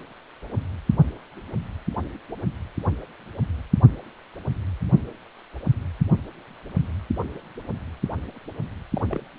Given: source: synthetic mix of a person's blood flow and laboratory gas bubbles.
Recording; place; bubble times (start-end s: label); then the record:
Doppler ultrasound of blood flow; precordium
8.95-9.06 s: bubbles
9.09-9.26 s: bubbles
From the record:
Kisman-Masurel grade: 211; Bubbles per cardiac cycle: several, 3 to 8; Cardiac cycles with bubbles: 1 to 10%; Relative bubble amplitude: barely perceptible (0.100 to 0.250); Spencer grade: 1 (occasional bubble signal discernible with the cardiac motion signal, with majority of cardiac periods free of bubbles); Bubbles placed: only in the low amplitude regions of the cardiac cycle